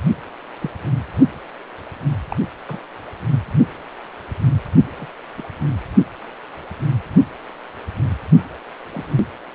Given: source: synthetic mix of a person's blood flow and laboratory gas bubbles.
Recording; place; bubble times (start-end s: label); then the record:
Doppler ultrasound of blood flow; precordium
0.59-0.71 s: bubbles
2.31-2.36 s: bubbles
2.68-2.78 s: bubbles
4.99-5.06 s: bubbles
5.37-5.43 s: bubbles
8.92-9.12 s: bubbles
From the record:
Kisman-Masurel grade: 121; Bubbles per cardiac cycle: 1 to 2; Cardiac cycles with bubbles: 10 to 50%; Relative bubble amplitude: barely perceptible (0.100 to 0.250); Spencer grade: 2 (many but less than half of the cardiac periods contain bubble signals, singularly or in groups); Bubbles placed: anywhere in the cardiac cycle